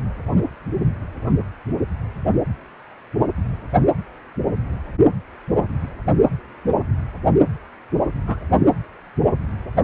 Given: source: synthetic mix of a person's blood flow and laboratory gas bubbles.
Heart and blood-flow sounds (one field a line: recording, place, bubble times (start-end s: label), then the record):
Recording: Doppler ultrasound of blood flow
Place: precordium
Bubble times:
8.27-8.38 s: bubbles
From the record:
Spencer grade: 1 (occasional bubble signal discernible with the cardiac motion signal, with majority of cardiac periods free of bubbles)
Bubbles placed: only in the low amplitude regions of the cardiac cycle